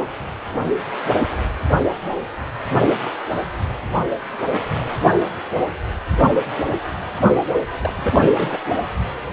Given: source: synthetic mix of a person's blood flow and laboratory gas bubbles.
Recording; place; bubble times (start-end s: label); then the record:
Doppler ultrasound of blood flow; precordium
7.79-8.58 s: bubbles
From the record:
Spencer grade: 1 (occasional bubble signal discernible with the cardiac motion signal, with majority of cardiac periods free of bubbles); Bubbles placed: anywhere in the cardiac cycle